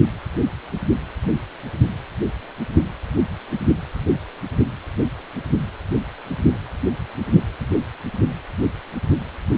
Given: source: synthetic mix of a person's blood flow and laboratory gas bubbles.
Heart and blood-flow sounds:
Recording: Doppler ultrasound of blood flow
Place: precordium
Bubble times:
no bubbles
From the record:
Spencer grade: 0 (complete lack of bubble signals)

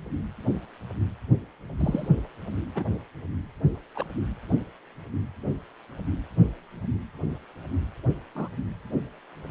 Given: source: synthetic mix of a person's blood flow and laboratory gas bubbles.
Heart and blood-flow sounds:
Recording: Doppler ultrasound of blood flow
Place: precordium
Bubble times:
1.79-2.08 s: bubbles
2.75-2.86 s: bubbles
3.95-4.04 s: bubbles
8.35-8.48 s: bubbles
From the record:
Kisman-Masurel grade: 121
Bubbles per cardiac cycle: 1 to 2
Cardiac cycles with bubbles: 10 to 50%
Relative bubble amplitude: barely perceptible (0.100 to 0.250)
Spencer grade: 2 (many but less than half of the cardiac periods contain bubble signals, singularly or in groups)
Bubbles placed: only in the low amplitude regions of the cardiac cycle

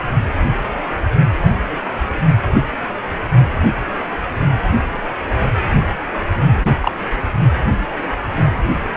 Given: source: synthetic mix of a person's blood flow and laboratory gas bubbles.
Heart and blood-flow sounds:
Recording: Doppler ultrasound of blood flow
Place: precordium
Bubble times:
6.63-6.72 s: bubbles
6.80-6.92 s: bubbles
From the record:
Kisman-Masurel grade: 113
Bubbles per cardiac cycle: 1 to 2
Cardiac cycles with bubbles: 1 to 10%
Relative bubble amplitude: loud (0.450 to 0.775)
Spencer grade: 1 (occasional bubble signal discernible with the cardiac motion signal, with majority of cardiac periods free of bubbles)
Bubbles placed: anywhere in the cardiac cycle

